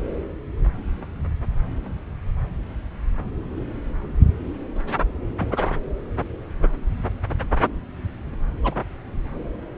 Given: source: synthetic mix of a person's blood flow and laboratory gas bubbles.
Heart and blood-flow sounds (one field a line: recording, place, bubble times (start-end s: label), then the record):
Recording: Doppler ultrasound of blood flow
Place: subclavian vein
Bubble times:
5.40-5.72 s: bubbles
8.62-8.75 s: bubbles
From the record:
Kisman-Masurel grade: 122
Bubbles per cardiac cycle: 1 to 2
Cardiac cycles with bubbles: 10 to 50%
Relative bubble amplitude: moderate (0.250 to 0.450)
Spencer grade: 2 (many but less than half of the cardiac periods contain bubble signals, singularly or in groups)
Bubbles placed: anywhere in the cardiac cycle